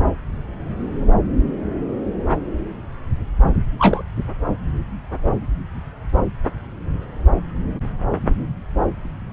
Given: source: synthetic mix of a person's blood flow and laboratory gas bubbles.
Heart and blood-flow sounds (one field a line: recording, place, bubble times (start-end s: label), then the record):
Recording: Doppler ultrasound of blood flow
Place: subclavian vein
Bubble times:
3.79-4.03 s: bubbles
From the record:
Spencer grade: 1 (occasional bubble signal discernible with the cardiac motion signal, with majority of cardiac periods free of bubbles)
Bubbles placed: anywhere in the cardiac cycle